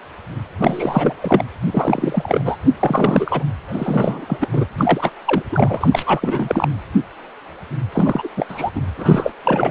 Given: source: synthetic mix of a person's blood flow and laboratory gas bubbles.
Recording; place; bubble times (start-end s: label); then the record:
Doppler ultrasound of blood flow; precordium
0.58-1.15 s: bubbles
1.22-1.43 s: bubbles
1.67-2.56 s: bubbles
2.79-3.43 s: bubbles
3.67-4.48 s: bubbles
4.52-4.66 s: bubbles
4.78-5.10 s: bubbles
5.25-5.42 s: bubbles
5.52-6.67 s: bubbles
7.92-8.29 s: bubbles
8.37-8.46 s: bubbles
8.48-8.71 s: bubbles
8.75-8.81 s: bubbles
8.97-9.32 s: bubbles
9.44-9.71 s: bubbles
From the record:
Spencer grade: 3 (all of the cardiac periods contain showers or single bubble signals, but not dominating or overriding the cardiac motion signals); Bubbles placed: anywhere in the cardiac cycle